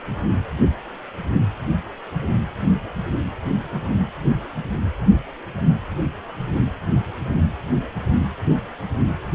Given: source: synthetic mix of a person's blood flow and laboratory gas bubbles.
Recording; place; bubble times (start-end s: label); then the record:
Doppler ultrasound of blood flow; precordium
no bubbles
From the record:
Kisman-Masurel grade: 000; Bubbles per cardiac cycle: 0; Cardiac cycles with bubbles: 0%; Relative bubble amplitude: no bubbles discernible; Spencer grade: 0 (complete lack of bubble signals)